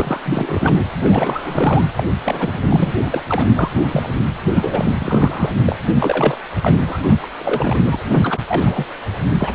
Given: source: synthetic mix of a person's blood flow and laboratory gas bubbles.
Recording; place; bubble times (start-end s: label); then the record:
Doppler ultrasound of blood flow; precordium
0.00-0.21 s: bubbles
0.25-0.89 s: bubbles
0.99-1.85 s: bubbles
1.96-2.04 s: bubbles
2.25-2.58 s: bubbles
2.62-2.92 s: bubbles
3.10-3.47 s: bubbles
3.56-3.71 s: bubbles
3.92-4.12 s: bubbles
4.53-4.93 s: bubbles
5.00-5.53 s: bubbles
5.66-5.76 s: bubbles
5.99-6.41 s: bubbles
6.62-6.74 s: bubbles
6.85-7.00 s: bubbles
7.03-7.17 s: bubbles
7.22-7.28 s: bubbles
7.39-7.80 s: bubbles
7.86-7.99 s: bubbles
8.08-8.39 s: bubbles
8.48-8.86 s: bubbles
9.38-9.55 s: bubbles
From the record:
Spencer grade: 3 (all of the cardiac periods contain showers or single bubble signals, but not dominating or overriding the cardiac motion signals); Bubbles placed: anywhere in the cardiac cycle